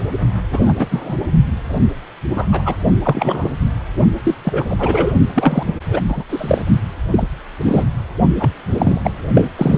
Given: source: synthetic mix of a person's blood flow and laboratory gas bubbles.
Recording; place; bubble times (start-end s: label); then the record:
Doppler ultrasound of blood flow; precordium
0.50-0.73 s: bubbles
0.79-0.88 s: bubbles
0.91-1.16 s: bubbles
2.29-2.49 s: bubbles
2.52-2.62 s: bubbles
2.65-2.75 s: bubbles
3.02-3.50 s: bubbles
4.24-4.35 s: bubbles
4.44-4.75 s: bubbles
4.79-5.12 s: bubbles
5.35-5.63 s: bubbles
5.66-5.74 s: bubbles
5.89-6.00 s: bubbles
6.08-6.24 s: bubbles
6.29-6.62 s: bubbles
7.11-7.27 s: bubbles
7.64-7.84 s: bubbles
8.39-8.51 s: bubbles
8.71-9.01 s: bubbles
9.04-9.11 s: bubbles
9.34-9.48 s: bubbles
9.57-9.78 s: bubbles
From the record:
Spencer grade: 3 (all of the cardiac periods contain showers or single bubble signals, but not dominating or overriding the cardiac motion signals); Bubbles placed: only in the low amplitude regions of the cardiac cycle